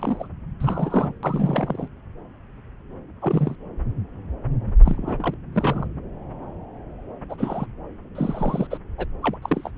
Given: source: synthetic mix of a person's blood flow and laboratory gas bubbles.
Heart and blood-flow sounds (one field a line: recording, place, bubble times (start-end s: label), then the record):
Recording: Doppler ultrasound of blood flow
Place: subclavian vein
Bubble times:
0.00-0.27 s: bubbles
0.60-1.14 s: bubbles
1.23-1.88 s: bubbles
3.22-3.56 s: bubbles
4.85-5.34 s: bubbles
5.52-5.87 s: bubbles
7.29-7.35 s: bubbles
7.38-7.66 s: bubbles
8.15-8.67 s: bubbles
8.70-8.78 s: bubbles
8.98-9.05 s: bubbles
9.23-9.37 s: bubbles
9.42-9.71 s: bubbles
From the record:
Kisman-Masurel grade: 232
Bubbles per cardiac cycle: several, 3 to 8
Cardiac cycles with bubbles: 50 to 99%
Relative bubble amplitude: moderate (0.250 to 0.450)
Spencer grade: 3 (all of the cardiac periods contain showers or single bubble signals, but not dominating or overriding the cardiac motion signals)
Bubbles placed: anywhere in the cardiac cycle